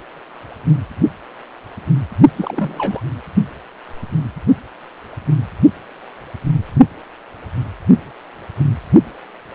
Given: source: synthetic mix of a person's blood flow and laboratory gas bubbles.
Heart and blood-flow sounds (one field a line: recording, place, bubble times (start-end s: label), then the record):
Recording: Doppler ultrasound of blood flow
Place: precordium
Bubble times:
2.36-3.00 s: bubbles
From the record:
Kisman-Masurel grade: 222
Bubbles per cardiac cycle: several, 3 to 8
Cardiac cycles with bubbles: 10 to 50%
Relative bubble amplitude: moderate (0.250 to 0.450)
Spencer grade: 2 (many but less than half of the cardiac periods contain bubble signals, singularly or in groups)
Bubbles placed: anywhere in the cardiac cycle